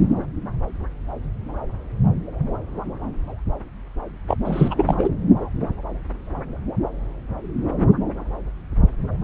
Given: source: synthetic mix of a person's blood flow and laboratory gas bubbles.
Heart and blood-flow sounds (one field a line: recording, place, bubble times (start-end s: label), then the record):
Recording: Doppler ultrasound of blood flow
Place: subclavian vein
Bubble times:
4.28-4.37 s: bubbles
4.45-5.10 s: bubbles
From the record:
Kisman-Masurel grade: 212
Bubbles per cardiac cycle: several, 3 to 8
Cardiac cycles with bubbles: 1 to 10%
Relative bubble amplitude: moderate (0.250 to 0.450)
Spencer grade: 1 (occasional bubble signal discernible with the cardiac motion signal, with majority of cardiac periods free of bubbles)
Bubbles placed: anywhere in the cardiac cycle